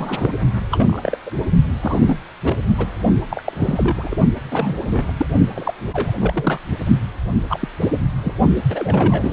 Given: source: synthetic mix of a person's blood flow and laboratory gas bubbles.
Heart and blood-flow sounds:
Doppler ultrasound of blood flow; precordium
0.00-0.37 s: bubbles
0.71-1.17 s: bubbles
1.26-1.30 s: bubbles
1.81-2.19 s: bubbles
2.43-2.56 s: bubbles
2.78-2.87 s: bubbles
3.31-4.15 s: bubbles
4.51-5.12 s: bubbles
5.17-5.26 s: bubbles
5.55-5.72 s: bubbles
5.93-6.13 s: bubbles
6.16-6.61 s: bubbles
7.48-7.68 s: bubbles
7.79-7.91 s: bubbles
8.23-8.34 s: bubbles
8.70-9.33 s: bubbles
From the record:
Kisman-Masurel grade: 242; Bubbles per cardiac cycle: several, 3 to 8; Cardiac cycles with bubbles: 100%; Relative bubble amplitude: moderate (0.250 to 0.450); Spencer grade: 3 (all of the cardiac periods contain showers or single bubble signals, but not dominating or overriding the cardiac motion signals); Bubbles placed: only in the low amplitude regions of the cardiac cycle

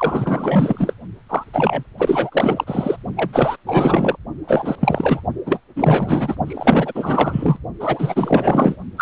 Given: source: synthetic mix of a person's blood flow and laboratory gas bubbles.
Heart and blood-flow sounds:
Doppler ultrasound of blood flow; precordium
0.00-0.94 s: bubbles
1.28-1.44 s: bubbles
1.53-1.84 s: bubbles
1.98-2.64 s: bubbles
2.67-2.96 s: bubbles
3.16-3.56 s: bubbles
3.67-4.17 s: bubbles
4.47-4.75 s: bubbles
4.80-5.21 s: bubbles
5.46-5.59 s: bubbles
5.75-6.35 s: bubbles
6.46-7.58 s: bubbles
7.79-8.76 s: bubbles
8.97-9.02 s: bubbles
From the record:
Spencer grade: 4 (maximum detectable bubble signal sounding continuously throughout systole and diastole of every cardiac period, and overriding the amplitude of the normal cardiac signals); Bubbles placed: only in the low amplitude regions of the cardiac cycle

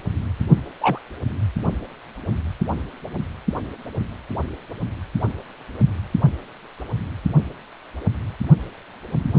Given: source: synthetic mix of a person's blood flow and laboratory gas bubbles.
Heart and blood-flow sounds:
Doppler ultrasound of blood flow; precordium
0.81-0.99 s: bubbles
From the record:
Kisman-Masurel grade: 112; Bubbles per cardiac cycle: 1 to 2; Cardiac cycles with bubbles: 1 to 10%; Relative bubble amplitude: moderate (0.250 to 0.450); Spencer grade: 1 (occasional bubble signal discernible with the cardiac motion signal, with majority of cardiac periods free of bubbles); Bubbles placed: anywhere in the cardiac cycle

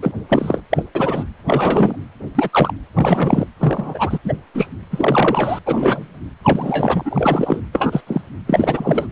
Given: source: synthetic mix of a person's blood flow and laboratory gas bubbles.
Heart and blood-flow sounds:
Doppler ultrasound of blood flow; precordium
0.02-0.11 s: bubbles
0.29-0.60 s: bubbles
0.71-0.82 s: bubbles
0.95-1.24 s: bubbles
1.47-1.96 s: bubbles
2.35-2.49 s: bubbles
2.52-2.72 s: bubbles
2.96-3.46 s: bubbles
3.59-4.18 s: bubbles
4.25-4.33 s: bubbles
4.54-4.68 s: bubbles
4.91-5.59 s: bubbles
5.66-6.10 s: bubbles
6.43-7.62 s: bubbles
7.73-8.01 s: bubbles
8.07-8.21 s: bubbles
8.46-9.08 s: bubbles
From the record:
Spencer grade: 3 (all of the cardiac periods contain showers or single bubble signals, but not dominating or overriding the cardiac motion signals); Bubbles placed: anywhere in the cardiac cycle

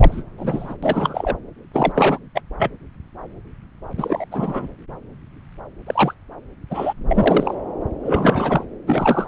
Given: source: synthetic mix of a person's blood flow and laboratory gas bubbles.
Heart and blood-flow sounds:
Doppler ultrasound of blood flow; subclavian vein
0.00-0.23 s: bubbles
0.37-0.74 s: bubbles
0.82-1.37 s: bubbles
1.73-2.18 s: bubbles
2.34-2.40 s: bubbles
2.58-2.70 s: bubbles
3.97-4.25 s: bubbles
4.31-4.67 s: bubbles
5.87-6.14 s: bubbles
6.70-6.93 s: bubbles
7.08-7.54 s: bubbles
8.03-8.64 s: bubbles
8.86-9.26 s: bubbles
From the record:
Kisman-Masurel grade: 233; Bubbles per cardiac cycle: several, 3 to 8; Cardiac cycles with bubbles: 50 to 99%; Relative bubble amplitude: loud (0.450 to 0.775); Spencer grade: 3 (all of the cardiac periods contain showers or single bubble signals, but not dominating or overriding the cardiac motion signals); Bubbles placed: anywhere in the cardiac cycle

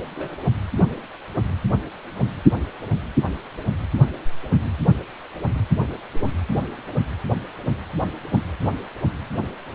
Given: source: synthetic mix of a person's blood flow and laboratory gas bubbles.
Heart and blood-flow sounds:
Doppler ultrasound of blood flow; precordium
0.15-0.35 s: bubbles
From the record:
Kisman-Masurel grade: 112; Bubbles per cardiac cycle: 1 to 2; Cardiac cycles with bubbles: 1 to 10%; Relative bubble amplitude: moderate (0.250 to 0.450); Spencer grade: 1 (occasional bubble signal discernible with the cardiac motion signal, with majority of cardiac periods free of bubbles); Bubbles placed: anywhere in the cardiac cycle

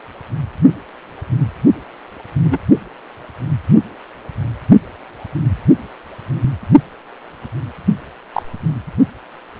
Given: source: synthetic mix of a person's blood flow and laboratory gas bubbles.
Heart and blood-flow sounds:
Doppler ultrasound of blood flow; precordium
2.43-2.58 s: bubbles
8.33-8.42 s: bubbles
From the record:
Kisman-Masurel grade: 122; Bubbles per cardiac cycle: 1 to 2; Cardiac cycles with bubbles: 10 to 50%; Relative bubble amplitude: moderate (0.250 to 0.450); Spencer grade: 2 (many but less than half of the cardiac periods contain bubble signals, singularly or in groups); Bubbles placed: only in the low amplitude regions of the cardiac cycle

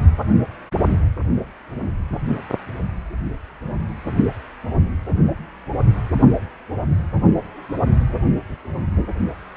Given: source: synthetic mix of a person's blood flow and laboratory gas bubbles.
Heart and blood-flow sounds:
Doppler ultrasound of blood flow; precordium
no bubbles
From the record:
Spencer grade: 0 (complete lack of bubble signals)

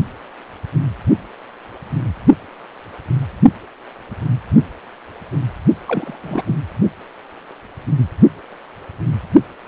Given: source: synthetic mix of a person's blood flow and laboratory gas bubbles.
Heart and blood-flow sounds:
Doppler ultrasound of blood flow; precordium
5.88-6.43 s: bubbles
6.46-6.55 s: bubbles
From the record:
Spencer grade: 1 (occasional bubble signal discernible with the cardiac motion signal, with majority of cardiac periods free of bubbles); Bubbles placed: only in the low amplitude regions of the cardiac cycle

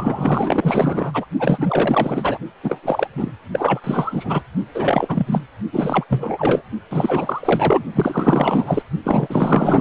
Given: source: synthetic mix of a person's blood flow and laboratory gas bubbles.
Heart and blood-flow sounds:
Doppler ultrasound of blood flow; precordium
0.00-1.25 s: bubbles
1.39-2.38 s: bubbles
2.63-3.08 s: bubbles
3.13-3.30 s: bubbles
3.52-3.80 s: bubbles
3.83-4.42 s: bubbles
4.74-5.42 s: bubbles
5.73-6.04 s: bubbles
6.09-6.62 s: bubbles
6.91-7.83 s: bubbles
7.92-8.82 s: bubbles
9.04-9.81 s: bubbles
From the record:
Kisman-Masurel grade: 444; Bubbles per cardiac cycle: continuous sound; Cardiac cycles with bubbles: 100%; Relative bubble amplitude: maximal (0.775 to 0.999); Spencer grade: 4 (maximum detectable bubble signal sounding continuously throughout systole and diastole of every cardiac period, and overriding the amplitude of the normal cardiac signals); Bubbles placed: only in the low amplitude regions of the cardiac cycle

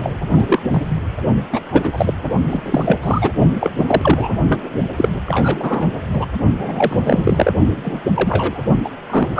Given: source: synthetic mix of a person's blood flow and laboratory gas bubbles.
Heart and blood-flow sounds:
Doppler ultrasound of blood flow; precordium
0.00-0.10 s: bubbles
0.30-0.62 s: bubbles
0.71-1.00 s: bubbles
1.52-1.61 s: bubbles
1.72-2.13 s: bubbles
2.51-3.31 s: bubbles
3.59-3.71 s: bubbles
3.77-3.84 s: bubbles
3.88-4.39 s: bubbles
4.48-4.69 s: bubbles
4.96-5.08 s: bubbles
5.25-5.87 s: bubbles
6.13-6.25 s: bubbles
6.57-7.51 s: bubbles
7.84-8.01 s: bubbles
8.12-8.65 s: bubbles
8.84-8.90 s: bubbles
9.10-9.40 s: bubbles
From the record:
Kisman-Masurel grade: 243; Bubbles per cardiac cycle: several, 3 to 8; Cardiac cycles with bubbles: 100%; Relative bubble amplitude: loud (0.450 to 0.775); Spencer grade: 3 (all of the cardiac periods contain showers or single bubble signals, but not dominating or overriding the cardiac motion signals); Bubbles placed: only in the low amplitude regions of the cardiac cycle

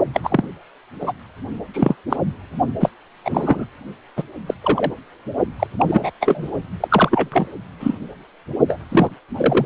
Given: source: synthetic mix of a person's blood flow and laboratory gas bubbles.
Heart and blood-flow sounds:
Doppler ultrasound of blood flow; precordium
0.13-0.48 s: bubbles
1.00-1.14 s: bubbles
1.74-1.95 s: bubbles
2.10-2.17 s: bubbles
2.80-2.89 s: bubbles
3.25-3.65 s: bubbles
4.17-4.23 s: bubbles
4.46-4.54 s: bubbles
4.63-4.92 s: bubbles
5.59-5.67 s: bubbles
5.79-6.11 s: bubbles
6.21-6.50 s: bubbles
6.80-7.47 s: bubbles
7.80-7.95 s: bubbles
8.68-8.79 s: bubbles
8.89-9.11 s: bubbles
9.37-9.66 s: bubbles
From the record:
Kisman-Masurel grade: 233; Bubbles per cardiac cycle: several, 3 to 8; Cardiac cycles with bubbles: 50 to 99%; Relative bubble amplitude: loud (0.450 to 0.775); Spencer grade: 3 (all of the cardiac periods contain showers or single bubble signals, but not dominating or overriding the cardiac motion signals); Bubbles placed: only in the low amplitude regions of the cardiac cycle

